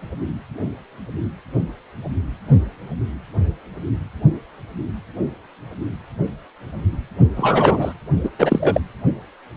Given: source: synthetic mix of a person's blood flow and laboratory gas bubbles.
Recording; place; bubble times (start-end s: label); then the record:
Doppler ultrasound of blood flow; precordium
7.37-7.93 s: bubbles
8.23-8.29 s: bubbles
8.38-8.80 s: bubbles
From the record:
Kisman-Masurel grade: 223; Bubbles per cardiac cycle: several, 3 to 8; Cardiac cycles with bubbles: 10 to 50%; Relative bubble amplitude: loud (0.450 to 0.775); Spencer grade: 2 (many but less than half of the cardiac periods contain bubble signals, singularly or in groups); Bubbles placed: only in the low amplitude regions of the cardiac cycle